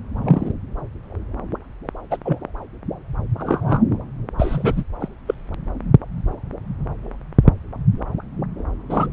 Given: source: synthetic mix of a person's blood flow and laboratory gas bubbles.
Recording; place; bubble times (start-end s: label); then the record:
Doppler ultrasound of blood flow; subclavian vein
0.24-0.51 s: bubbles
2.10-2.17 s: bubbles
2.25-2.38 s: bubbles
3.38-3.79 s: bubbles
4.39-4.84 s: bubbles
5.00-5.08 s: bubbles
5.27-5.35 s: bubbles
8.89-9.06 s: bubbles
From the record:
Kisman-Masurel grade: 122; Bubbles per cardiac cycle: 1 to 2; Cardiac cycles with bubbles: 10 to 50%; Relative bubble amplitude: moderate (0.250 to 0.450); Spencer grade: 2 (many but less than half of the cardiac periods contain bubble signals, singularly or in groups); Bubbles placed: anywhere in the cardiac cycle